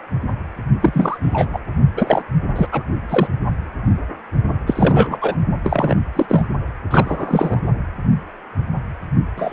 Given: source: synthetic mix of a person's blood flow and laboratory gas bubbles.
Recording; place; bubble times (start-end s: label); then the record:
Doppler ultrasound of blood flow; precordium
0.81-1.18 s: bubbles
1.23-1.60 s: bubbles
1.96-2.22 s: bubbles
2.56-2.68 s: bubbles
2.72-2.83 s: bubbles
3.09-3.27 s: bubbles
4.67-5.36 s: bubbles
5.63-5.96 s: bubbles
6.15-6.46 s: bubbles
6.91-7.59 s: bubbles
9.36-9.53 s: bubbles
From the record:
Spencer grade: 3 (all of the cardiac periods contain showers or single bubble signals, but not dominating or overriding the cardiac motion signals); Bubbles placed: only in the low amplitude regions of the cardiac cycle